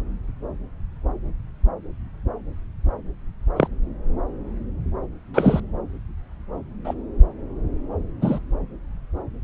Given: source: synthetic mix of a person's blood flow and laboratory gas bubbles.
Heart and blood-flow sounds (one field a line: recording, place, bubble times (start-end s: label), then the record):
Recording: Doppler ultrasound of blood flow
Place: subclavian vein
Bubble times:
3.56-3.67 s: bubbles
5.34-5.60 s: bubbles
6.84-6.94 s: bubbles
8.21-8.39 s: bubbles
From the record:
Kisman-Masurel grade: 123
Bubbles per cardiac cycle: 1 to 2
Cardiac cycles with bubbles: 10 to 50%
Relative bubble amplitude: loud (0.450 to 0.775)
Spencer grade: 2 (many but less than half of the cardiac periods contain bubble signals, singularly or in groups)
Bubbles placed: anywhere in the cardiac cycle